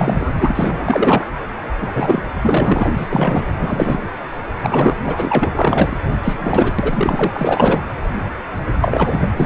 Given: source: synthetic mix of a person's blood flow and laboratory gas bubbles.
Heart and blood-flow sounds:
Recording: Doppler ultrasound of blood flow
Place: precordium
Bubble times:
0.00-0.32 s: bubbles
0.38-1.27 s: bubbles
1.81-2.22 s: bubbles
2.42-2.91 s: bubbles
2.96-3.46 s: bubbles
3.59-3.99 s: bubbles
4.58-4.97 s: bubbles
5.04-5.50 s: bubbles
5.55-5.97 s: bubbles
6.23-6.74 s: bubbles
6.79-7.83 s: bubbles
8.80-9.30 s: bubbles
9.36-9.46 s: bubbles
From the record:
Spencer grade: 3 (all of the cardiac periods contain showers or single bubble signals, but not dominating or overriding the cardiac motion signals)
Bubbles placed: anywhere in the cardiac cycle

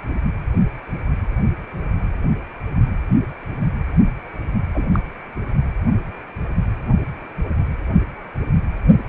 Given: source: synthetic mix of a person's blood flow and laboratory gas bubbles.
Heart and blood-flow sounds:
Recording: Doppler ultrasound of blood flow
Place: precordium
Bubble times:
4.74-4.83 s: bubbles
4.92-4.99 s: bubbles
From the record:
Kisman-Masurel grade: 122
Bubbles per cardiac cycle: 1 to 2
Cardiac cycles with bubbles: 10 to 50%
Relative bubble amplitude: moderate (0.250 to 0.450)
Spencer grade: 2 (many but less than half of the cardiac periods contain bubble signals, singularly or in groups)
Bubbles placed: only in the low amplitude regions of the cardiac cycle

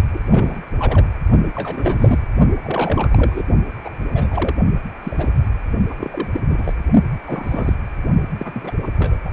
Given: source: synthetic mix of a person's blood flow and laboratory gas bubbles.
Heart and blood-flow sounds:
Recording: Doppler ultrasound of blood flow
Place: precordium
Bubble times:
0.14-0.20 s: bubbles
0.27-0.61 s: bubbles
0.77-1.06 s: bubbles
1.55-2.19 s: bubbles
2.63-3.44 s: bubbles
3.84-3.90 s: bubbles
4.13-4.55 s: bubbles
5.03-5.49 s: bubbles
5.90-5.95 s: bubbles
5.98-6.29 s: bubbles
6.31-6.40 s: bubbles
6.49-6.73 s: bubbles
7.27-7.74 s: bubbles
8.38-8.75 s: bubbles
8.82-8.89 s: bubbles
8.98-9.16 s: bubbles
9.25-9.30 s: bubbles
From the record:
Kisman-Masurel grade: 242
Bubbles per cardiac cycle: several, 3 to 8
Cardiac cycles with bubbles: 100%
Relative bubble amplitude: moderate (0.250 to 0.450)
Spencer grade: 3 (all of the cardiac periods contain showers or single bubble signals, but not dominating or overriding the cardiac motion signals)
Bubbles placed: only in the low amplitude regions of the cardiac cycle

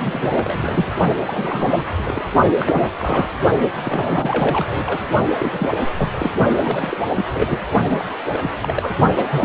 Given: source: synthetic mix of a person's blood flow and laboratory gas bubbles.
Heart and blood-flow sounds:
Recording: Doppler ultrasound of blood flow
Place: precordium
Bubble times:
0.00-0.29 s: bubbles
0.35-0.85 s: bubbles
1.26-1.85 s: bubbles
1.97-2.29 s: bubbles
2.56-2.89 s: bubbles
2.98-3.29 s: bubbles
3.84-4.99 s: bubbles
5.38-5.78 s: bubbles
5.97-6.09 s: bubbles
6.19-6.32 s: bubbles
6.57-6.97 s: bubbles
7.17-7.25 s: bubbles
7.33-7.60 s: bubbles
7.88-8.04 s: bubbles
8.28-8.50 s: bubbles
8.59-8.97 s: bubbles
9.16-9.45 s: bubbles
From the record:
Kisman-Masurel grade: 342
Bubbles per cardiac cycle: rolling drumbeat, 9 or more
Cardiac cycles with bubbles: 100%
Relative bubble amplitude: moderate (0.250 to 0.450)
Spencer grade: 3 (all of the cardiac periods contain showers or single bubble signals, but not dominating or overriding the cardiac motion signals)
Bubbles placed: only in the low amplitude regions of the cardiac cycle

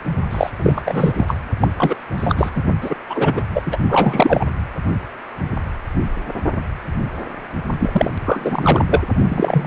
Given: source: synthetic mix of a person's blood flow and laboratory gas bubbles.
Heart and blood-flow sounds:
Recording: Doppler ultrasound of blood flow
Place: precordium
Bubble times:
0.31-0.51 s: bubbles
0.59-0.82 s: bubbles
0.85-1.12 s: bubbles
1.17-1.37 s: bubbles
1.60-1.68 s: bubbles
1.77-1.96 s: bubbles
2.17-2.51 s: bubbles
2.55-2.62 s: bubbles
2.81-2.96 s: bubbles
3.09-3.42 s: bubbles
3.54-3.62 s: bubbles
3.66-3.77 s: bubbles
3.89-4.47 s: bubbles
7.79-8.10 s: bubbles
8.25-8.85 s: bubbles
8.88-9.02 s: bubbles
9.28-9.67 s: bubbles
From the record:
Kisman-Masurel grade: 333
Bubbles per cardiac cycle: rolling drumbeat, 9 or more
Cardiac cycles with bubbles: 50 to 99%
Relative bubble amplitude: loud (0.450 to 0.775)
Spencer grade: 3 (all of the cardiac periods contain showers or single bubble signals, but not dominating or overriding the cardiac motion signals)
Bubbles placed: only in the low amplitude regions of the cardiac cycle

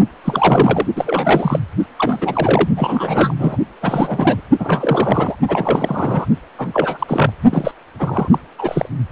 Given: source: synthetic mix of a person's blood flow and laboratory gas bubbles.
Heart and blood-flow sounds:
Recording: Doppler ultrasound of blood flow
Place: precordium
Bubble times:
0.24-0.86 s: bubbles
0.95-1.60 s: bubbles
1.97-2.69 s: bubbles
2.76-3.34 s: bubbles
3.39-3.56 s: bubbles
3.81-4.41 s: bubbles
4.59-5.35 s: bubbles
5.47-6.26 s: bubbles
6.57-7.31 s: bubbles
7.50-7.71 s: bubbles
7.99-8.38 s: bubbles
8.58-8.89 s: bubbles
From the record:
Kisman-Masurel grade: 343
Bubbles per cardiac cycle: rolling drumbeat, 9 or more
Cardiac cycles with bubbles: 100%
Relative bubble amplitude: loud (0.450 to 0.775)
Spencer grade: 3 (all of the cardiac periods contain showers or single bubble signals, but not dominating or overriding the cardiac motion signals)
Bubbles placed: only in the low amplitude regions of the cardiac cycle

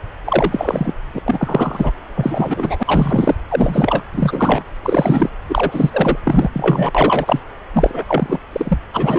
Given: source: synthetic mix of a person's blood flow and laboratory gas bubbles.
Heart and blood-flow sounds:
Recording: Doppler ultrasound of blood flow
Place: subclavian vein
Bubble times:
0.24-0.93 s: bubbles
1.14-1.19 s: bubbles
1.26-1.92 s: bubbles
2.16-3.35 s: bubbles
3.49-4.04 s: bubbles
4.12-4.63 s: bubbles
4.83-5.29 s: bubbles
5.49-5.90 s: bubbles
5.93-6.17 s: bubbles
6.25-6.50 s: bubbles
6.54-6.91 s: bubbles
6.95-7.40 s: bubbles
7.73-8.05 s: bubbles
8.08-8.38 s: bubbles
8.52-8.78 s: bubbles
8.93-9.19 s: bubbles
From the record:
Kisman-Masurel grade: 343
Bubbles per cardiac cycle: rolling drumbeat, 9 or more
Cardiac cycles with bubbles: 100%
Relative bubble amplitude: loud (0.450 to 0.775)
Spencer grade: 3 (all of the cardiac periods contain showers or single bubble signals, but not dominating or overriding the cardiac motion signals)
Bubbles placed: anywhere in the cardiac cycle

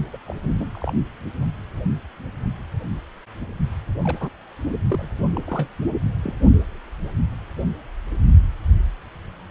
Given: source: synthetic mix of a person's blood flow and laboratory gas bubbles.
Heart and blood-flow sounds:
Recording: Doppler ultrasound of blood flow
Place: precordium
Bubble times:
0.12-0.18 s: bubbles
0.26-0.36 s: bubbles
0.54-0.68 s: bubbles
0.71-0.93 s: bubbles
4.01-4.29 s: bubbles
4.89-5.09 s: bubbles
5.35-5.39 s: bubbles
5.47-5.67 s: bubbles
6.24-6.33 s: bubbles
From the record:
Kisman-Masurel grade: 221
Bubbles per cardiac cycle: several, 3 to 8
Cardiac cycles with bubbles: 10 to 50%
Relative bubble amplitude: barely perceptible (0.100 to 0.250)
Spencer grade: 2 (many but less than half of the cardiac periods contain bubble signals, singularly or in groups)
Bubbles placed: only in the low amplitude regions of the cardiac cycle

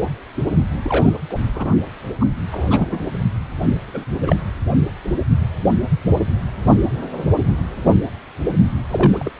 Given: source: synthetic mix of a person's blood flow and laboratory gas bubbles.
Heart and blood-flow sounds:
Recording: Doppler ultrasound of blood flow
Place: precordium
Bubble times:
0.82-1.10 s: bubbles
1.29-1.37 s: bubbles
1.53-1.75 s: bubbles
2.20-2.25 s: bubbles
2.50-3.10 s: bubbles
3.87-4.04 s: bubbles
4.22-4.36 s: bubbles
8.92-9.30 s: bubbles
From the record:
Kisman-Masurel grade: 222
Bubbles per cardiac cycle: several, 3 to 8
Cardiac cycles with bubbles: 10 to 50%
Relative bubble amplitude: moderate (0.250 to 0.450)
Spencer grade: 2 (many but less than half of the cardiac periods contain bubble signals, singularly or in groups)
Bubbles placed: anywhere in the cardiac cycle

